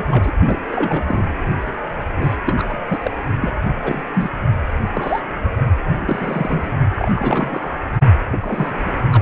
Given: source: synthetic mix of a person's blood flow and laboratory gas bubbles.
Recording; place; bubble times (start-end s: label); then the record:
Doppler ultrasound of blood flow; precordium
0.00-0.32 s: bubbles
0.47-0.58 s: bubbles
0.71-1.04 s: bubbles
1.07-1.27 s: bubbles
2.14-2.36 s: bubbles
2.46-2.77 s: bubbles
2.89-2.99 s: bubbles
3.04-3.11 s: bubbles
3.41-3.52 s: bubbles
3.83-4.03 s: bubbles
4.15-4.31 s: bubbles
4.94-5.21 s: bubbles
5.99-6.77 s: bubbles
6.95-7.11 s: bubbles
7.15-7.72 s: bubbles
8.31-8.92 s: bubbles
9.12-9.22 s: bubbles
From the record:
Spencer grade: 3 (all of the cardiac periods contain showers or single bubble signals, but not dominating or overriding the cardiac motion signals); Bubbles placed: only in the low amplitude regions of the cardiac cycle